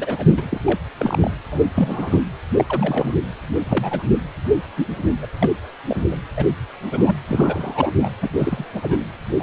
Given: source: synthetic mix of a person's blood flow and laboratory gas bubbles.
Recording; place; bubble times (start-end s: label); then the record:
Doppler ultrasound of blood flow; precordium
0.00-0.24 s: bubbles
0.29-0.61 s: bubbles
0.66-0.79 s: bubbles
0.97-1.31 s: bubbles
1.51-1.67 s: bubbles
1.74-2.21 s: bubbles
2.56-2.65 s: bubbles
2.68-3.15 s: bubbles
3.48-3.55 s: bubbles
3.65-4.03 s: bubbles
4.76-4.87 s: bubbles
5.21-5.26 s: bubbles
5.39-5.52 s: bubbles
5.87-6.03 s: bubbles
6.10-6.16 s: bubbles
6.37-6.55 s: bubbles
6.92-7.16 s: bubbles
7.29-7.92 s: bubbles
7.99-8.09 s: bubbles
8.21-8.31 s: bubbles
8.39-8.65 s: bubbles
8.73-9.04 s: bubbles
9.37-9.43 s: bubbles
From the record:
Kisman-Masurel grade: 242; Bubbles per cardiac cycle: several, 3 to 8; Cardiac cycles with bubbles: 100%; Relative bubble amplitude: moderate (0.250 to 0.450); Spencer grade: 3 (all of the cardiac periods contain showers or single bubble signals, but not dominating or overriding the cardiac motion signals); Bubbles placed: anywhere in the cardiac cycle